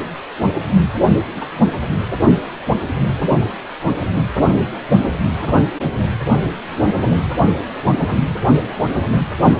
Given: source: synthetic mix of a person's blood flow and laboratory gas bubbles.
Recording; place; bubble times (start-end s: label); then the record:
Doppler ultrasound of blood flow; precordium
1.36-1.47 s: bubbles
5.33-5.54 s: bubbles
From the record:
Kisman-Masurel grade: 122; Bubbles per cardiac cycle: 1 to 2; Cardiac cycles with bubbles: 10 to 50%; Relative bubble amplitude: moderate (0.250 to 0.450); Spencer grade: 2 (many but less than half of the cardiac periods contain bubble signals, singularly or in groups); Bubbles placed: only in the low amplitude regions of the cardiac cycle